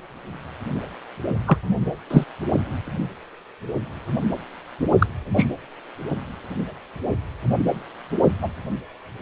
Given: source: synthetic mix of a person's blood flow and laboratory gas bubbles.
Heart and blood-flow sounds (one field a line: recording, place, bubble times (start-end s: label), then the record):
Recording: Doppler ultrasound of blood flow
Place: precordium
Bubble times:
1.47-1.57 s: bubbles
2.10-2.24 s: bubbles
4.98-5.06 s: bubbles
5.36-5.48 s: bubbles
8.41-8.49 s: bubbles
From the record:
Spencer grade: 2 (many but less than half of the cardiac periods contain bubble signals, singularly or in groups)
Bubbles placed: only in the low amplitude regions of the cardiac cycle